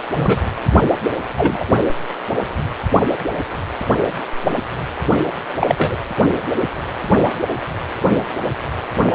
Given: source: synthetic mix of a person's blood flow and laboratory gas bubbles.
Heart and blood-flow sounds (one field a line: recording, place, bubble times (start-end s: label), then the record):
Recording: Doppler ultrasound of blood flow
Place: precordium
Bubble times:
0.15-0.39 s: bubbles
1.37-1.65 s: bubbles
5.59-5.75 s: bubbles
5.77-5.96 s: bubbles
From the record:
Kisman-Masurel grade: 123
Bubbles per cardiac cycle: 1 to 2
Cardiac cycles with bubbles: 10 to 50%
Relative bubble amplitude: loud (0.450 to 0.775)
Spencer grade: 2 (many but less than half of the cardiac periods contain bubble signals, singularly or in groups)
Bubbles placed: only in the low amplitude regions of the cardiac cycle